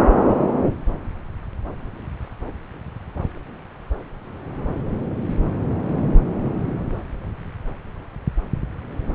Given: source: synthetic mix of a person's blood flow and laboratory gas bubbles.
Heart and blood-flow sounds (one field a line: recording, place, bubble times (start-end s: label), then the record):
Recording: Doppler ultrasound of blood flow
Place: subclavian vein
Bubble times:
no bubbles
From the record:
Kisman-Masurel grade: 000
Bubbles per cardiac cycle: 0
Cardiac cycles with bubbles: 0%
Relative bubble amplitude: no bubbles discernible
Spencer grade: 0 (complete lack of bubble signals)